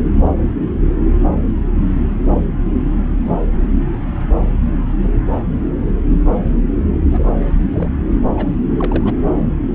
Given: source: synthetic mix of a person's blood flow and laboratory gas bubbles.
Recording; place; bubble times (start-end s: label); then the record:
Doppler ultrasound of blood flow; subclavian vein
3.25-3.34 s: bubbles
7.11-7.24 s: bubbles
7.57-7.67 s: bubbles
7.73-7.89 s: bubbles
8.31-8.49 s: bubbles
8.77-9.14 s: bubbles
From the record:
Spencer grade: 2 (many but less than half of the cardiac periods contain bubble signals, singularly or in groups); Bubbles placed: anywhere in the cardiac cycle